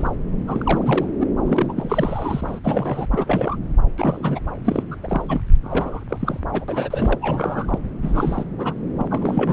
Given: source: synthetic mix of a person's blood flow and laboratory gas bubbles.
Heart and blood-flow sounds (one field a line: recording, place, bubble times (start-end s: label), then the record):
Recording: Doppler ultrasound of blood flow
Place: subclavian vein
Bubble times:
0.00-0.11 s: bubbles
0.48-1.06 s: bubbles
1.20-1.27 s: bubbles
1.44-1.73 s: bubbles
1.76-2.59 s: bubbles
2.63-3.06 s: bubbles
3.11-3.56 s: bubbles
3.97-4.39 s: bubbles
4.64-4.83 s: bubbles
4.91-4.96 s: bubbles
5.04-5.41 s: bubbles
5.62-6.04 s: bubbles
6.09-6.39 s: bubbles
6.49-6.65 s: bubbles
6.68-7.78 s: bubbles
8.02-8.45 s: bubbles
8.58-8.74 s: bubbles
8.98-9.07 s: bubbles
9.11-9.53 s: bubbles
From the record:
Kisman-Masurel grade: 342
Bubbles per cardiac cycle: rolling drumbeat, 9 or more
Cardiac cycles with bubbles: 100%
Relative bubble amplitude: moderate (0.250 to 0.450)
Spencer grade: 3 (all of the cardiac periods contain showers or single bubble signals, but not dominating or overriding the cardiac motion signals)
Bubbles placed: anywhere in the cardiac cycle